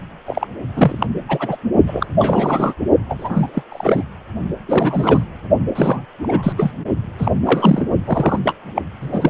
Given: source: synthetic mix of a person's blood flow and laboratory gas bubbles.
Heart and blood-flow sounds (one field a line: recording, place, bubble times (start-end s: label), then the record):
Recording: Doppler ultrasound of blood flow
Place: precordium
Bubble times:
0.26-0.47 s: bubbles
0.74-1.06 s: bubbles
1.28-1.57 s: bubbles
1.86-2.06 s: bubbles
2.19-2.74 s: bubbles
3.08-3.50 s: bubbles
3.54-3.62 s: bubbles
3.72-4.02 s: bubbles
4.68-5.26 s: bubbles
5.75-6.05 s: bubbles
6.22-6.52 s: bubbles
6.57-6.71 s: bubbles
7.18-7.32 s: bubbles
7.45-7.89 s: bubbles
8.05-8.39 s: bubbles
8.43-8.53 s: bubbles
8.75-8.82 s: bubbles
9.01-9.30 s: bubbles
From the record:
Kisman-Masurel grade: 343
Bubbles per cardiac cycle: rolling drumbeat, 9 or more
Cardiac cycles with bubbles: 100%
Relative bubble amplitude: loud (0.450 to 0.775)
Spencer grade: 3 (all of the cardiac periods contain showers or single bubble signals, but not dominating or overriding the cardiac motion signals)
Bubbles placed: only in the low amplitude regions of the cardiac cycle